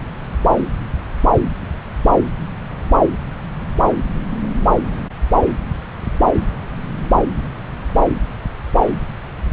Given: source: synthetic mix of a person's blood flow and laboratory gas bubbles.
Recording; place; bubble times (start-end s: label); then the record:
Doppler ultrasound of blood flow; subclavian vein
no bubbles
From the record:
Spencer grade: 0 (complete lack of bubble signals)